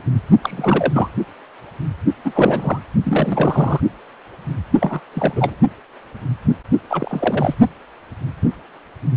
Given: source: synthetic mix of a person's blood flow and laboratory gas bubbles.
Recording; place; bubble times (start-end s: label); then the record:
Doppler ultrasound of blood flow; precordium
0.42-1.09 s: bubbles
2.25-2.83 s: bubbles
3.04-3.80 s: bubbles
4.80-5.00 s: bubbles
5.13-5.55 s: bubbles
6.88-7.54 s: bubbles
From the record:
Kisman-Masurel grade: 332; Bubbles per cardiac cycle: rolling drumbeat, 9 or more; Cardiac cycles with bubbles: 50 to 99%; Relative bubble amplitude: moderate (0.250 to 0.450); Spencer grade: 3 (all of the cardiac periods contain showers or single bubble signals, but not dominating or overriding the cardiac motion signals); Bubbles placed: only in the low amplitude regions of the cardiac cycle